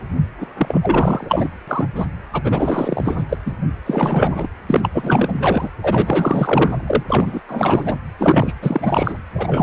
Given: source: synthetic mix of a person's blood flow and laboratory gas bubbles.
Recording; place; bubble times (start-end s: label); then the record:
Doppler ultrasound of blood flow; precordium
0.41-0.46 s: bubbles
0.57-1.49 s: bubbles
1.68-1.88 s: bubbles
1.95-2.06 s: bubbles
2.33-3.24 s: bubbles
3.29-3.37 s: bubbles
3.46-3.52 s: bubbles
3.67-3.70 s: bubbles
3.86-4.47 s: bubbles
4.69-4.89 s: bubbles
4.93-5.70 s: bubbles
5.83-6.83 s: bubbles
6.86-7.04 s: bubbles
7.09-7.41 s: bubbles
7.48-8.00 s: bubbles
8.18-8.53 s: bubbles
8.62-9.18 s: bubbles
9.35-9.62 s: bubbles
From the record:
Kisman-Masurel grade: 444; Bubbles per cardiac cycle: continuous sound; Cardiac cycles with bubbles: 100%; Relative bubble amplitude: maximal (0.775 to 0.999); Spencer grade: 4 (maximum detectable bubble signal sounding continuously throughout systole and diastole of every cardiac period, and overriding the amplitude of the normal cardiac signals); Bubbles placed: anywhere in the cardiac cycle